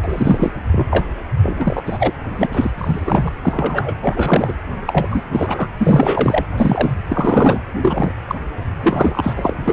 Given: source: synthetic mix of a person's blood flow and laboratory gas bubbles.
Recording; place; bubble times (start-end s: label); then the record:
Doppler ultrasound of blood flow; precordium
0.04-0.52 s: bubbles
0.71-0.87 s: bubbles
0.91-1.07 s: bubbles
1.43-1.56 s: bubbles
1.59-2.13 s: bubbles
2.32-2.72 s: bubbles
2.77-3.33 s: bubbles
3.43-3.95 s: bubbles
4.02-4.53 s: bubbles
4.86-5.23 s: bubbles
5.32-5.70 s: bubbles
5.78-6.45 s: bubbles
6.58-6.94 s: bubbles
7.10-7.61 s: bubbles
7.82-8.12 s: bubbles
8.27-8.35 s: bubbles
8.82-9.55 s: bubbles
9.64-9.73 s: bubbles
From the record:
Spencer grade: 3 (all of the cardiac periods contain showers or single bubble signals, but not dominating or overriding the cardiac motion signals); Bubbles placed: anywhere in the cardiac cycle